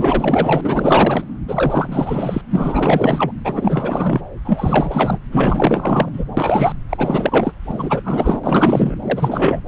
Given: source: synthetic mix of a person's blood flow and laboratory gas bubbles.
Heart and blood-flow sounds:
Doppler ultrasound of blood flow; subclavian vein
0.00-1.24 s: bubbles
1.48-2.42 s: bubbles
2.50-3.32 s: bubbles
3.44-4.21 s: bubbles
4.45-5.19 s: bubbles
5.31-6.08 s: bubbles
6.13-6.24 s: bubbles
6.37-6.73 s: bubbles
6.89-7.53 s: bubbles
7.67-8.01 s: bubbles
8.04-8.40 s: bubbles
8.44-8.96 s: bubbles
9.02-9.60 s: bubbles
From the record:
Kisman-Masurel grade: 444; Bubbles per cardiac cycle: continuous sound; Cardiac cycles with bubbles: 100%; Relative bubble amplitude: maximal (0.775 to 0.999); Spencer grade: 4 (maximum detectable bubble signal sounding continuously throughout systole and diastole of every cardiac period, and overriding the amplitude of the normal cardiac signals); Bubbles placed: anywhere in the cardiac cycle

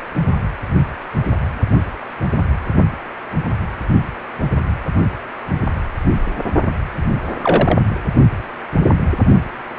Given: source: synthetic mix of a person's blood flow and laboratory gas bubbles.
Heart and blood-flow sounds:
Doppler ultrasound of blood flow; precordium
7.42-7.79 s: bubbles
From the record:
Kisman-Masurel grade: 123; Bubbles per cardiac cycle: 1 to 2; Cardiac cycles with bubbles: 10 to 50%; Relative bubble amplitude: loud (0.450 to 0.775); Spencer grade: 2 (many but less than half of the cardiac periods contain bubble signals, singularly or in groups); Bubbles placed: only in the low amplitude regions of the cardiac cycle

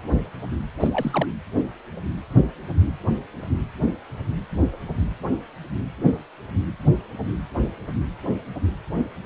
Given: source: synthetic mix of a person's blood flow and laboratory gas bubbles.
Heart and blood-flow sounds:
Doppler ultrasound of blood flow; precordium
0.80-0.88 s: bubbles
0.92-1.27 s: bubbles
From the record:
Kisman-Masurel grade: 211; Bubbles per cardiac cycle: several, 3 to 8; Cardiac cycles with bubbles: 1 to 10%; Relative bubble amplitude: barely perceptible (0.100 to 0.250); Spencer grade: 1 (occasional bubble signal discernible with the cardiac motion signal, with majority of cardiac periods free of bubbles); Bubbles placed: anywhere in the cardiac cycle

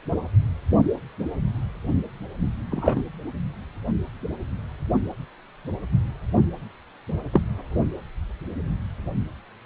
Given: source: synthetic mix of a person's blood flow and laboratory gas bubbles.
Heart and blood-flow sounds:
Doppler ultrasound of blood flow; precordium
2.71-3.02 s: bubbles
7.33-7.41 s: bubbles
From the record:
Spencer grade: 2 (many but less than half of the cardiac periods contain bubble signals, singularly or in groups); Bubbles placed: only in the low amplitude regions of the cardiac cycle

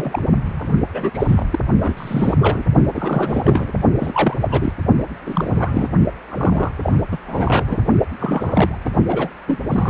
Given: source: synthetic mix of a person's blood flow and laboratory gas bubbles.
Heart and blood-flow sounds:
Doppler ultrasound of blood flow; precordium
0.00-0.23 s: bubbles
0.45-0.70 s: bubbles
0.91-1.10 s: bubbles
1.14-1.44 s: bubbles
1.52-1.59 s: bubbles
1.80-2.35 s: bubbles
2.39-2.64 s: bubbles
2.94-3.73 s: bubbles
3.99-4.37 s: bubbles
4.41-4.73 s: bubbles
5.26-5.88 s: bubbles
6.30-6.71 s: bubbles
6.83-6.92 s: bubbles
7.12-7.18 s: bubbles
7.27-7.78 s: bubbles
8.20-8.78 s: bubbles
8.85-8.90 s: bubbles
9.07-9.29 s: bubbles
9.47-9.59 s: bubbles
9.69-9.90 s: bubbles
From the record:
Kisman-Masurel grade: 342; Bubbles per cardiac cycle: rolling drumbeat, 9 or more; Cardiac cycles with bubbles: 100%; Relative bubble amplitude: moderate (0.250 to 0.450); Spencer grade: 3 (all of the cardiac periods contain showers or single bubble signals, but not dominating or overriding the cardiac motion signals); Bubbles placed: only in the low amplitude regions of the cardiac cycle

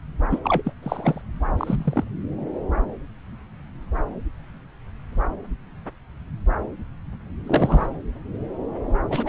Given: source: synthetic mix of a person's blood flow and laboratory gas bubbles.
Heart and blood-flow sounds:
Doppler ultrasound of blood flow; subclavian vein
0.30-0.40 s: bubbles
0.44-0.72 s: bubbles
0.82-1.22 s: bubbles
1.57-2.04 s: bubbles
7.46-7.87 s: bubbles
9.09-9.29 s: bubbles
From the record:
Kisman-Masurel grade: 222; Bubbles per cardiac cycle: several, 3 to 8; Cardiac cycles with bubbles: 10 to 50%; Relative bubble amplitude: moderate (0.250 to 0.450); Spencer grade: 2 (many but less than half of the cardiac periods contain bubble signals, singularly or in groups); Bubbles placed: anywhere in the cardiac cycle

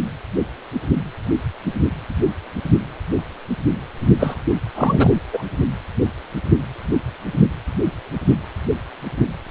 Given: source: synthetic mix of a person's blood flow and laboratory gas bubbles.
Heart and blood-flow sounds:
Doppler ultrasound of blood flow; precordium
4.20-4.35 s: bubbles
4.75-5.15 s: bubbles
5.33-5.42 s: bubbles
From the record:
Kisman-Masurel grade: 213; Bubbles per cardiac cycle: several, 3 to 8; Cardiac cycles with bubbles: 1 to 10%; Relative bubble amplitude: loud (0.450 to 0.775); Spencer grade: 1 (occasional bubble signal discernible with the cardiac motion signal, with majority of cardiac periods free of bubbles); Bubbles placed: anywhere in the cardiac cycle

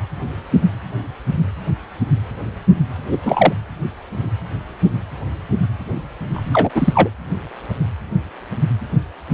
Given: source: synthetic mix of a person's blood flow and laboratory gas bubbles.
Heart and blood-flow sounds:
Doppler ultrasound of blood flow; precordium
3.10-3.19 s: bubbles
3.25-3.52 s: bubbles
6.33-6.70 s: bubbles
6.75-7.10 s: bubbles
From the record:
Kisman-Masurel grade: 223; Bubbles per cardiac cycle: several, 3 to 8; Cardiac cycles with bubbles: 10 to 50%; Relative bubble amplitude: loud (0.450 to 0.775); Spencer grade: 2 (many but less than half of the cardiac periods contain bubble signals, singularly or in groups); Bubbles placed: anywhere in the cardiac cycle

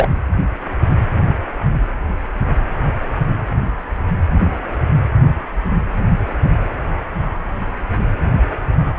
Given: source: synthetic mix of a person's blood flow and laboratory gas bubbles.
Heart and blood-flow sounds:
Doppler ultrasound of blood flow; precordium
0.00-0.09 s: bubbles
From the record:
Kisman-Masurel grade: 213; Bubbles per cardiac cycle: several, 3 to 8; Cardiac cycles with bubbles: 1 to 10%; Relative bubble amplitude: loud (0.450 to 0.775); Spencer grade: 1 (occasional bubble signal discernible with the cardiac motion signal, with majority of cardiac periods free of bubbles); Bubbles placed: anywhere in the cardiac cycle

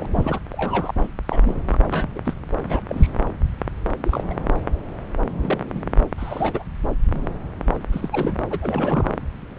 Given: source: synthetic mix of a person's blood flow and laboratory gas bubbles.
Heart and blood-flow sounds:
Doppler ultrasound of blood flow; subclavian vein
0.00-0.06 s: bubbles
0.16-0.40 s: bubbles
0.52-0.91 s: bubbles
0.98-1.08 s: bubbles
1.28-1.55 s: bubbles
1.72-1.78 s: bubbles
1.91-2.09 s: bubbles
2.15-2.20 s: bubbles
2.25-2.35 s: bubbles
2.69-2.81 s: bubbles
2.89-3.10 s: bubbles
4.04-4.24 s: bubbles
4.29-4.34 s: bubbles
5.42-5.59 s: bubbles
5.75-5.81 s: bubbles
6.17-6.63 s: bubbles
7.92-8.09 s: bubbles
8.12-8.41 s: bubbles
8.49-9.08 s: bubbles
From the record:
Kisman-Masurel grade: 232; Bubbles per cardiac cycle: several, 3 to 8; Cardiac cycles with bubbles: 50 to 99%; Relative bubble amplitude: moderate (0.250 to 0.450); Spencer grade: 3 (all of the cardiac periods contain showers or single bubble signals, but not dominating or overriding the cardiac motion signals); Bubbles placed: anywhere in the cardiac cycle

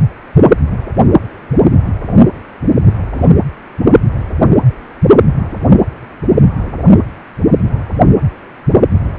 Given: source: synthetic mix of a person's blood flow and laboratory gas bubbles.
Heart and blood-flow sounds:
Doppler ultrasound of blood flow; precordium
3.14-3.25 s: bubbles
From the record:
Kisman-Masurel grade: 112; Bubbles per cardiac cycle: 1 to 2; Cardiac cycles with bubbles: 1 to 10%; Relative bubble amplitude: moderate (0.250 to 0.450); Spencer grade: 1 (occasional bubble signal discernible with the cardiac motion signal, with majority of cardiac periods free of bubbles); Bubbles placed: anywhere in the cardiac cycle

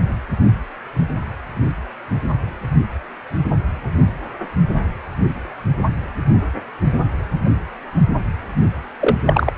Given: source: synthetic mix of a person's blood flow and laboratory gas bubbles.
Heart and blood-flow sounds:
Doppler ultrasound of blood flow; precordium
9.01-9.17 s: bubbles
9.26-9.52 s: bubbles
From the record:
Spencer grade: 1 (occasional bubble signal discernible with the cardiac motion signal, with majority of cardiac periods free of bubbles); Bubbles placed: only in the low amplitude regions of the cardiac cycle

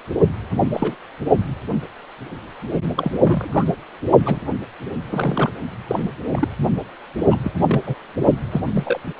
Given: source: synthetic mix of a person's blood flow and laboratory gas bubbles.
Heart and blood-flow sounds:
Doppler ultrasound of blood flow; precordium
0.73-0.95 s: bubbles
2.95-3.65 s: bubbles
4.22-4.40 s: bubbles
5.09-5.52 s: bubbles
5.87-6.10 s: bubbles
6.33-6.48 s: bubbles
7.21-7.36 s: bubbles
7.44-7.52 s: bubbles
7.62-7.82 s: bubbles
7.87-7.95 s: bubbles
8.51-8.61 s: bubbles
8.72-9.00 s: bubbles
From the record:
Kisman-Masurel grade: 232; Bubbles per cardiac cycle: several, 3 to 8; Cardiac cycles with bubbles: 50 to 99%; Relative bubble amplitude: moderate (0.250 to 0.450); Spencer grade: 3 (all of the cardiac periods contain showers or single bubble signals, but not dominating or overriding the cardiac motion signals); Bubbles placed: only in the low amplitude regions of the cardiac cycle

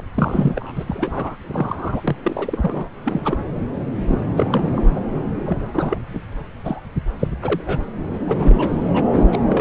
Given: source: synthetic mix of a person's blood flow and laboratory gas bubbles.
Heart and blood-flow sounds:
Doppler ultrasound of blood flow; subclavian vein
0.00-0.02 s: bubbles
0.14-0.72 s: bubbles
0.76-1.37 s: bubbles
1.46-2.16 s: bubbles
2.23-2.89 s: bubbles
3.04-3.37 s: bubbles
4.08-4.32 s: bubbles
4.35-5.01 s: bubbles
5.46-5.58 s: bubbles
5.73-5.98 s: bubbles
6.13-6.19 s: bubbles
6.32-6.35 s: bubbles
6.63-6.80 s: bubbles
7.19-7.27 s: bubbles
7.42-7.61 s: bubbles
7.67-7.78 s: bubbles
8.27-8.84 s: bubbles
8.94-9.04 s: bubbles
9.13-9.23 s: bubbles
9.32-9.38 s: bubbles
9.48-9.61 s: bubbles
From the record:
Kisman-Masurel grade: 242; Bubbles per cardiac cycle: several, 3 to 8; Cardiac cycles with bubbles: 100%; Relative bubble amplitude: moderate (0.250 to 0.450); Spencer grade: 3 (all of the cardiac periods contain showers or single bubble signals, but not dominating or overriding the cardiac motion signals); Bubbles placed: anywhere in the cardiac cycle

